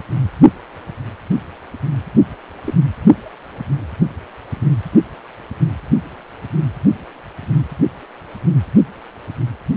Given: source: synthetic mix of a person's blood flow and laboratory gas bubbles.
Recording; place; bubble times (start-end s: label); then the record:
Doppler ultrasound of blood flow; precordium
2.65-2.74 s: bubbles
From the record:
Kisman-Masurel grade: 112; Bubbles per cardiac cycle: 1 to 2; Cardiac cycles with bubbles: 1 to 10%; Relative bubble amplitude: moderate (0.250 to 0.450); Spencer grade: 1 (occasional bubble signal discernible with the cardiac motion signal, with majority of cardiac periods free of bubbles); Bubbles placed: only in the low amplitude regions of the cardiac cycle